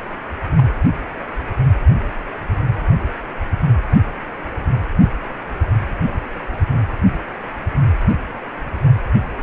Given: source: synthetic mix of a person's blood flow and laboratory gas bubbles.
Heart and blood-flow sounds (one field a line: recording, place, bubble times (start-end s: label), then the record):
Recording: Doppler ultrasound of blood flow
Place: precordium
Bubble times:
0.57-0.63 s: bubbles
From the record:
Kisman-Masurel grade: 111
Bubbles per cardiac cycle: 1 to 2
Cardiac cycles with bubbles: 1 to 10%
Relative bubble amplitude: barely perceptible (0.100 to 0.250)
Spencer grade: 1 (occasional bubble signal discernible with the cardiac motion signal, with majority of cardiac periods free of bubbles)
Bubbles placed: anywhere in the cardiac cycle